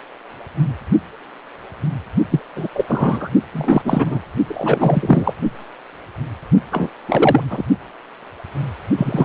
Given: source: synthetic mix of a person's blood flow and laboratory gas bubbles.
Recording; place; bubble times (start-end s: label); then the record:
Doppler ultrasound of blood flow; precordium
2.30-2.40 s: bubbles
2.55-2.67 s: bubbles
2.73-2.85 s: bubbles
2.88-3.29 s: bubbles
3.53-4.21 s: bubbles
4.48-5.33 s: bubbles
6.71-6.89 s: bubbles
7.08-7.45 s: bubbles
7.50-7.65 s: bubbles
8.97-9.25 s: bubbles
From the record:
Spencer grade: 3 (all of the cardiac periods contain showers or single bubble signals, but not dominating or overriding the cardiac motion signals); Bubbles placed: only in the low amplitude regions of the cardiac cycle